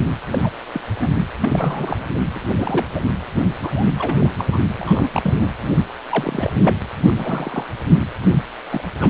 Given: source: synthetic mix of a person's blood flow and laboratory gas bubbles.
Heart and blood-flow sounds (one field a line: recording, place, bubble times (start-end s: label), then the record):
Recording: Doppler ultrasound of blood flow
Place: precordium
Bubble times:
0.34-0.49 s: bubbles
0.72-0.81 s: bubbles
0.99-1.10 s: bubbles
1.41-2.06 s: bubbles
2.14-2.19 s: bubbles
2.35-2.41 s: bubbles
2.46-2.87 s: bubbles
2.95-3.00 s: bubbles
3.61-3.71 s: bubbles
3.74-3.93 s: bubbles
3.98-4.30 s: bubbles
4.38-4.47 s: bubbles
4.52-4.58 s: bubbles
4.77-5.09 s: bubbles
5.14-5.34 s: bubbles
5.36-5.47 s: bubbles
6.09-6.83 s: bubbles
7.07-7.66 s: bubbles
8.71-8.84 s: bubbles
8.99-9.10 s: bubbles
From the record:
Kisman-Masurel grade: 242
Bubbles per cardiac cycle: several, 3 to 8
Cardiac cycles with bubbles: 100%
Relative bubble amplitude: moderate (0.250 to 0.450)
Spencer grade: 3 (all of the cardiac periods contain showers or single bubble signals, but not dominating or overriding the cardiac motion signals)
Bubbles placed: anywhere in the cardiac cycle